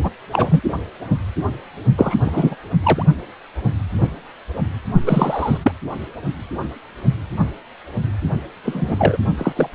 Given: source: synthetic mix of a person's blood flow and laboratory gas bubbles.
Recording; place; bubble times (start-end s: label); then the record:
Doppler ultrasound of blood flow; precordium
0.03-0.10 s: bubbles
0.32-0.61 s: bubbles
1.98-2.16 s: bubbles
2.25-2.55 s: bubbles
2.83-3.04 s: bubbles
5.06-5.57 s: bubbles
5.62-5.71 s: bubbles
8.64-9.17 s: bubbles
9.38-9.53 s: bubbles
9.55-9.69 s: bubbles
From the record:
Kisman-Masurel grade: 223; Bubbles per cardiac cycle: several, 3 to 8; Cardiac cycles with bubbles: 10 to 50%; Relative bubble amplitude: loud (0.450 to 0.775); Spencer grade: 2 (many but less than half of the cardiac periods contain bubble signals, singularly or in groups); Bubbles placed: only in the low amplitude regions of the cardiac cycle